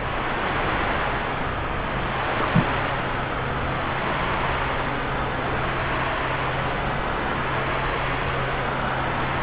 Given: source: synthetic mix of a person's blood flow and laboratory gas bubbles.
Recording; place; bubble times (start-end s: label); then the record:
Doppler ultrasound of blood flow; subclavian vein
2.39-2.47 s: bubbles
2.52-2.67 s: bubbles
From the record:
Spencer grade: 1 (occasional bubble signal discernible with the cardiac motion signal, with majority of cardiac periods free of bubbles); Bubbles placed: anywhere in the cardiac cycle